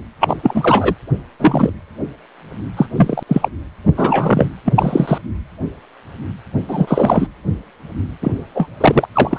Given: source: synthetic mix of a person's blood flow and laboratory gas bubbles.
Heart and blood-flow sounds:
Doppler ultrasound of blood flow; precordium
0.20-0.36 s: bubbles
0.42-0.95 s: bubbles
1.40-1.73 s: bubbles
2.77-2.86 s: bubbles
2.96-3.23 s: bubbles
3.27-3.48 s: bubbles
3.96-4.49 s: bubbles
4.65-5.18 s: bubbles
6.68-7.27 s: bubbles
8.21-8.34 s: bubbles
8.54-8.67 s: bubbles
8.80-9.05 s: bubbles
9.13-9.39 s: bubbles
From the record:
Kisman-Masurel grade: 233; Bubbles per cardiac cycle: several, 3 to 8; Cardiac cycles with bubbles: 50 to 99%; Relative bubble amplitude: loud (0.450 to 0.775); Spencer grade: 3 (all of the cardiac periods contain showers or single bubble signals, but not dominating or overriding the cardiac motion signals); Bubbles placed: anywhere in the cardiac cycle

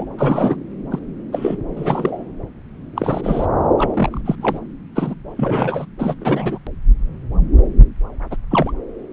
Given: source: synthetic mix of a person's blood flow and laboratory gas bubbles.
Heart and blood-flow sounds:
Doppler ultrasound of blood flow; subclavian vein
0.00-0.05 s: bubbles
0.17-0.55 s: bubbles
0.91-0.99 s: bubbles
1.32-1.57 s: bubbles
1.76-2.23 s: bubbles
2.95-3.46 s: bubbles
3.77-4.21 s: bubbles
4.25-4.35 s: bubbles
4.41-4.59 s: bubbles
4.96-5.14 s: bubbles
5.37-5.85 s: bubbles
5.98-6.14 s: bubbles
6.21-6.58 s: bubbles
8.31-8.36 s: bubbles
8.51-8.73 s: bubbles
From the record:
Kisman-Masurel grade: 232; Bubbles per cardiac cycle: several, 3 to 8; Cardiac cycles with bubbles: 50 to 99%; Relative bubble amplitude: moderate (0.250 to 0.450); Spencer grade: 3 (all of the cardiac periods contain showers or single bubble signals, but not dominating or overriding the cardiac motion signals); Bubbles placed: anywhere in the cardiac cycle

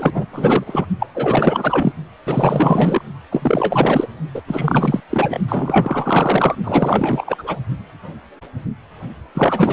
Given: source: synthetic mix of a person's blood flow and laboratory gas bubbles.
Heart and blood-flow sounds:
Doppler ultrasound of blood flow; precordium
0.00-0.12 s: bubbles
0.14-0.26 s: bubbles
0.32-0.87 s: bubbles
0.99-1.06 s: bubbles
1.15-1.92 s: bubbles
2.26-3.04 s: bubbles
3.31-4.07 s: bubbles
4.35-4.42 s: bubbles
4.47-5.01 s: bubbles
5.10-5.40 s: bubbles
5.48-6.56 s: bubbles
6.64-7.62 s: bubbles
9.34-9.73 s: bubbles
From the record:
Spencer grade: 4 (maximum detectable bubble signal sounding continuously throughout systole and diastole of every cardiac period, and overriding the amplitude of the normal cardiac signals); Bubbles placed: only in the low amplitude regions of the cardiac cycle

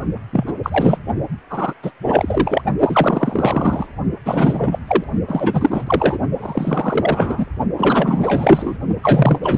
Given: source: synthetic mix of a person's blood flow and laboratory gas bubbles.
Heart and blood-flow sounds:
Doppler ultrasound of blood flow; precordium
0.32-0.53 s: bubbles
0.63-0.98 s: bubbles
1.49-1.74 s: bubbles
1.82-1.92 s: bubbles
2.04-2.62 s: bubbles
2.79-3.86 s: bubbles
4.26-4.79 s: bubbles
4.87-5.04 s: bubbles
5.28-5.84 s: bubbles
5.87-6.20 s: bubbles
6.38-7.47 s: bubbles
7.76-8.78 s: bubbles
9.03-9.39 s: bubbles
9.42-9.58 s: bubbles
From the record:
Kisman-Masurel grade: 343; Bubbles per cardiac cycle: rolling drumbeat, 9 or more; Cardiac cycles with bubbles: 100%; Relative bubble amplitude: loud (0.450 to 0.775); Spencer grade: 3 (all of the cardiac periods contain showers or single bubble signals, but not dominating or overriding the cardiac motion signals); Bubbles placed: only in the low amplitude regions of the cardiac cycle

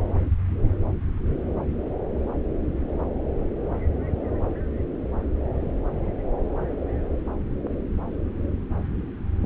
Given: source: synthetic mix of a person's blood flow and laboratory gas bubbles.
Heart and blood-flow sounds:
Doppler ultrasound of blood flow; subclavian vein
no bubbles
From the record:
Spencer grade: 0 (complete lack of bubble signals)

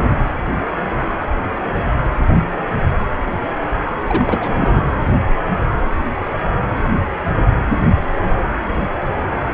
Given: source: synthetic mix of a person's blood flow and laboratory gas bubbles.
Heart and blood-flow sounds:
Doppler ultrasound of blood flow; precordium
4.03-4.83 s: bubbles
From the record:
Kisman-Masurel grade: 212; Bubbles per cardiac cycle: several, 3 to 8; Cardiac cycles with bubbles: 1 to 10%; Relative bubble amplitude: moderate (0.250 to 0.450); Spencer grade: 1 (occasional bubble signal discernible with the cardiac motion signal, with majority of cardiac periods free of bubbles); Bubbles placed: anywhere in the cardiac cycle

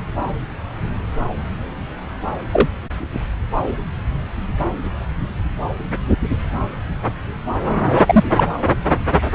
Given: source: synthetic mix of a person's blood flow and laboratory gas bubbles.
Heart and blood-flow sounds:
Doppler ultrasound of blood flow; subclavian vein
2.52-2.68 s: bubbles
8.06-8.24 s: bubbles
8.36-8.44 s: bubbles
From the record:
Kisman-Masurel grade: 123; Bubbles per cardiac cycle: 1 to 2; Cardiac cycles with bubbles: 10 to 50%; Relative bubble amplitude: loud (0.450 to 0.775); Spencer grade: 2 (many but less than half of the cardiac periods contain bubble signals, singularly or in groups); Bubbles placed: anywhere in the cardiac cycle

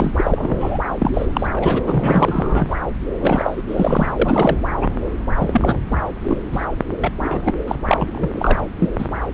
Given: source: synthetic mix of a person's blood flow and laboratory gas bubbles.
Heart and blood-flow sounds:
Doppler ultrasound of blood flow; subclavian vein
0.00-0.12 s: bubbles
0.17-0.79 s: bubbles
0.99-1.26 s: bubbles
1.33-1.47 s: bubbles
1.54-1.83 s: bubbles
1.86-2.76 s: bubbles
3.12-3.63 s: bubbles
3.67-4.12 s: bubbles
4.18-4.57 s: bubbles
4.80-4.90 s: bubbles
5.36-5.79 s: bubbles
5.90-5.97 s: bubbles
6.24-6.40 s: bubbles
6.52-6.66 s: bubbles
7.00-7.12 s: bubbles
7.19-7.53 s: bubbles
7.67-7.75 s: bubbles
7.87-8.30 s: bubbles
8.33-8.62 s: bubbles
8.79-8.89 s: bubbles
8.98-9.09 s: bubbles
From the record:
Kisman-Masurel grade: 343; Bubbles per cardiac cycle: rolling drumbeat, 9 or more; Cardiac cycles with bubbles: 100%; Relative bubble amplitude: loud (0.450 to 0.775); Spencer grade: 3 (all of the cardiac periods contain showers or single bubble signals, but not dominating or overriding the cardiac motion signals); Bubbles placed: anywhere in the cardiac cycle

